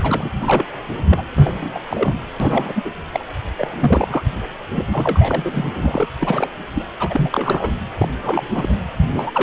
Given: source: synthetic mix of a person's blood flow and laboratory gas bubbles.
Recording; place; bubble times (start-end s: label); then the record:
Doppler ultrasound of blood flow; precordium
0.00-0.30 s: bubbles
0.40-0.64 s: bubbles
1.09-1.23 s: bubbles
1.34-1.79 s: bubbles
1.90-2.15 s: bubbles
2.40-2.72 s: bubbles
2.75-2.90 s: bubbles
3.13-3.25 s: bubbles
3.58-4.23 s: bubbles
4.72-4.85 s: bubbles
4.92-6.08 s: bubbles
6.19-6.50 s: bubbles
6.75-6.84 s: bubbles
6.99-7.71 s: bubbles
7.98-8.09 s: bubbles
8.23-8.47 s: bubbles
8.50-8.76 s: bubbles
9.11-9.31 s: bubbles
9.34-9.43 s: bubbles
From the record:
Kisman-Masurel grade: 342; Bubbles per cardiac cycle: rolling drumbeat, 9 or more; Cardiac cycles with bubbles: 100%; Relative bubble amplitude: moderate (0.250 to 0.450); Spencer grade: 3 (all of the cardiac periods contain showers or single bubble signals, but not dominating or overriding the cardiac motion signals); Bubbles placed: anywhere in the cardiac cycle